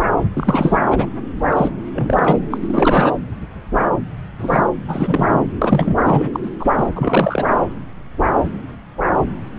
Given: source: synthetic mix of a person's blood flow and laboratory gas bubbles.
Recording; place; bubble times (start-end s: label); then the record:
Doppler ultrasound of blood flow; subclavian vein
0.00-0.04 s: bubbles
0.33-0.78 s: bubbles
0.91-1.06 s: bubbles
1.50-1.70 s: bubbles
1.94-2.40 s: bubbles
2.50-2.58 s: bubbles
2.61-3.12 s: bubbles
4.38-4.62 s: bubbles
4.87-5.41 s: bubbles
5.62-5.96 s: bubbles
6.05-6.29 s: bubbles
6.33-6.39 s: bubbles
6.42-6.50 s: bubbles
6.59-6.67 s: bubbles
6.76-6.84 s: bubbles
6.96-7.46 s: bubbles
From the record:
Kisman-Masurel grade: 333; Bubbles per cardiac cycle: rolling drumbeat, 9 or more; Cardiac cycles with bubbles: 50 to 99%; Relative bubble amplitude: loud (0.450 to 0.775); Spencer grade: 3 (all of the cardiac periods contain showers or single bubble signals, but not dominating or overriding the cardiac motion signals); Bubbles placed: anywhere in the cardiac cycle